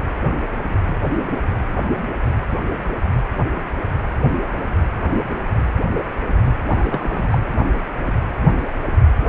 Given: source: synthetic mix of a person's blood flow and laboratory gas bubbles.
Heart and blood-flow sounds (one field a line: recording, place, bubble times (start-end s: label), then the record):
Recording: Doppler ultrasound of blood flow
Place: precordium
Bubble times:
6.68-7.38 s: bubbles
From the record:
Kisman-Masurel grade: 212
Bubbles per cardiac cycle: several, 3 to 8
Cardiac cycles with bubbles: 1 to 10%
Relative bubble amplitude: moderate (0.250 to 0.450)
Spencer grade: 1 (occasional bubble signal discernible with the cardiac motion signal, with majority of cardiac periods free of bubbles)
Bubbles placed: anywhere in the cardiac cycle